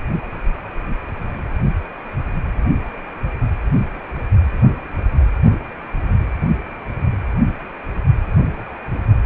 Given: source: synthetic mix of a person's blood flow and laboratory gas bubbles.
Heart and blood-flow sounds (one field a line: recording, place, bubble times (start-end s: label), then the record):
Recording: Doppler ultrasound of blood flow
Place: precordium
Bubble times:
no bubbles
From the record:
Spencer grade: 0 (complete lack of bubble signals)